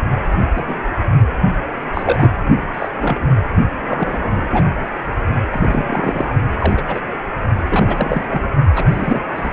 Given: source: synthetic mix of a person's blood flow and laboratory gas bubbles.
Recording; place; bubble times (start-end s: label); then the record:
Doppler ultrasound of blood flow; precordium
0.56-0.63 s: bubbles
0.67-0.74 s: bubbles
1.94-2.29 s: bubbles
2.73-2.90 s: bubbles
3.01-3.31 s: bubbles
3.87-4.71 s: bubbles
5.51-6.33 s: bubbles
6.58-6.74 s: bubbles
6.77-6.82 s: bubbles
6.87-7.00 s: bubbles
7.70-8.25 s: bubbles
8.29-8.42 s: bubbles
8.75-8.84 s: bubbles
8.88-9.19 s: bubbles
9.35-9.52 s: bubbles
From the record:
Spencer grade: 3 (all of the cardiac periods contain showers or single bubble signals, but not dominating or overriding the cardiac motion signals); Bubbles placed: only in the low amplitude regions of the cardiac cycle